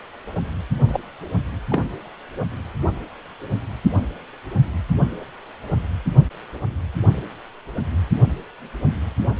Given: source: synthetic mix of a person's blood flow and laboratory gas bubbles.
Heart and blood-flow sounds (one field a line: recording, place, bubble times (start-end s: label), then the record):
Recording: Doppler ultrasound of blood flow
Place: precordium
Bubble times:
0.88-1.00 s: bubbles
1.70-1.87 s: bubbles
From the record:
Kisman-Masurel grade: 112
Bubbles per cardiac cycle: 1 to 2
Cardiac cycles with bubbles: 1 to 10%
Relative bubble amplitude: moderate (0.250 to 0.450)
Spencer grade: 1 (occasional bubble signal discernible with the cardiac motion signal, with majority of cardiac periods free of bubbles)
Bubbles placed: only in the low amplitude regions of the cardiac cycle